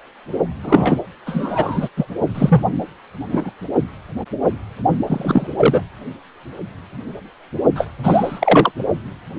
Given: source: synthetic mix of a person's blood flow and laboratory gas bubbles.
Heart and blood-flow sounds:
Doppler ultrasound of blood flow; precordium
0.63-0.98 s: bubbles
1.26-1.89 s: bubbles
1.96-2.06 s: bubbles
2.34-2.63 s: bubbles
3.31-3.50 s: bubbles
5.06-5.47 s: bubbles
5.56-5.81 s: bubbles
7.75-7.87 s: bubbles
8.03-8.71 s: bubbles
From the record:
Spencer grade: 2 (many but less than half of the cardiac periods contain bubble signals, singularly or in groups); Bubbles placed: only in the low amplitude regions of the cardiac cycle

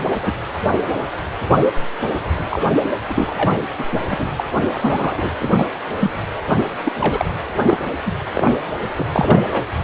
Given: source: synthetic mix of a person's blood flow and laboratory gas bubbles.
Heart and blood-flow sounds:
Doppler ultrasound of blood flow; precordium
0.00-0.06 s: bubbles
0.23-0.32 s: bubbles
2.02-2.09 s: bubbles
2.33-2.62 s: bubbles
3.09-3.58 s: bubbles
3.79-3.85 s: bubbles
3.92-4.00 s: bubbles
4.10-4.29 s: bubbles
4.37-4.44 s: bubbles
4.72-5.31 s: bubbles
5.39-5.65 s: bubbles
5.99-6.10 s: bubbles
6.85-6.92 s: bubbles
6.97-7.25 s: bubbles
7.67-7.77 s: bubbles
8.06-8.12 s: bubbles
8.35-8.50 s: bubbles
8.96-9.07 s: bubbles
9.12-9.39 s: bubbles
9.52-9.62 s: bubbles
From the record:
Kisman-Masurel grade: 232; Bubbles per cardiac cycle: several, 3 to 8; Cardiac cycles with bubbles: 50 to 99%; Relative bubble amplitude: moderate (0.250 to 0.450); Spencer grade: 3 (all of the cardiac periods contain showers or single bubble signals, but not dominating or overriding the cardiac motion signals); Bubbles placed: anywhere in the cardiac cycle

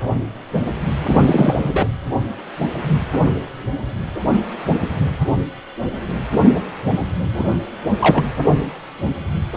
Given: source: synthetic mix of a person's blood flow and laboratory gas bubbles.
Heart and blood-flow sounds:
Doppler ultrasound of blood flow; precordium
1.07-1.89 s: bubbles
7.33-7.57 s: bubbles
7.99-8.24 s: bubbles
From the record:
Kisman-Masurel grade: 223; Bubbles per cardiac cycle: several, 3 to 8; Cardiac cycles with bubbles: 10 to 50%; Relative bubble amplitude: loud (0.450 to 0.775); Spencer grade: 2 (many but less than half of the cardiac periods contain bubble signals, singularly or in groups); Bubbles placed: anywhere in the cardiac cycle

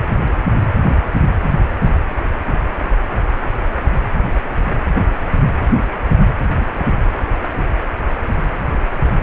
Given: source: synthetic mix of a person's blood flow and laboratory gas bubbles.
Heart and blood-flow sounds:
Doppler ultrasound of blood flow; precordium
6.59-6.66 s: bubbles
6.76-6.86 s: bubbles
From the record:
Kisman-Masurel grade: 112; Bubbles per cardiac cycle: 1 to 2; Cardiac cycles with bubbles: 1 to 10%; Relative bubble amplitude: moderate (0.250 to 0.450); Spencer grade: 1 (occasional bubble signal discernible with the cardiac motion signal, with majority of cardiac periods free of bubbles); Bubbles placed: anywhere in the cardiac cycle

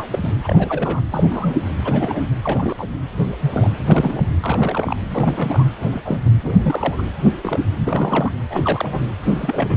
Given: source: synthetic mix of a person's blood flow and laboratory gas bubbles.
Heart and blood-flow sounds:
Doppler ultrasound of blood flow; precordium
0.00-0.07 s: bubbles
0.11-0.19 s: bubbles
0.23-0.32 s: bubbles
0.44-1.00 s: bubbles
1.11-1.54 s: bubbles
1.84-2.23 s: bubbles
2.41-2.88 s: bubbles
3.17-3.33 s: bubbles
3.41-3.71 s: bubbles
3.77-4.29 s: bubbles
4.42-4.95 s: bubbles
5.11-5.66 s: bubbles
5.80-6.02 s: bubbles
6.04-6.21 s: bubbles
6.25-6.30 s: bubbles
6.42-7.02 s: bubbles
7.41-7.59 s: bubbles
7.84-8.31 s: bubbles
8.50-9.08 s: bubbles
9.23-9.77 s: bubbles
From the record:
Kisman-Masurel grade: 242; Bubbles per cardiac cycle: several, 3 to 8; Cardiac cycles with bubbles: 100%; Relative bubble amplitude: moderate (0.250 to 0.450); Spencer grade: 3 (all of the cardiac periods contain showers or single bubble signals, but not dominating or overriding the cardiac motion signals); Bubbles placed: anywhere in the cardiac cycle

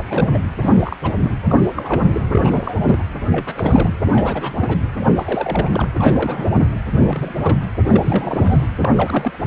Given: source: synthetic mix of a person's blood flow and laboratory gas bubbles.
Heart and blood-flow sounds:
Doppler ultrasound of blood flow; precordium
0.06-0.38 s: bubbles
0.59-0.96 s: bubbles
1.02-1.13 s: bubbles
1.23-1.35 s: bubbles
1.47-1.66 s: bubbles
1.74-2.03 s: bubbles
2.12-2.22 s: bubbles
2.31-2.98 s: bubbles
3.31-3.99 s: bubbles
4.05-4.77 s: bubbles
5.00-5.05 s: bubbles
5.17-5.88 s: bubbles
5.95-6.55 s: bubbles
6.60-6.67 s: bubbles
6.92-7.34 s: bubbles
7.40-7.58 s: bubbles
7.85-8.69 s: bubbles
8.81-8.89 s: bubbles
8.95-9.39 s: bubbles
From the record:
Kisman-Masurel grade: 342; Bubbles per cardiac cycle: rolling drumbeat, 9 or more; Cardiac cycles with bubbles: 100%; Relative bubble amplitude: moderate (0.250 to 0.450); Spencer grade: 3 (all of the cardiac periods contain showers or single bubble signals, but not dominating or overriding the cardiac motion signals); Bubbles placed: anywhere in the cardiac cycle

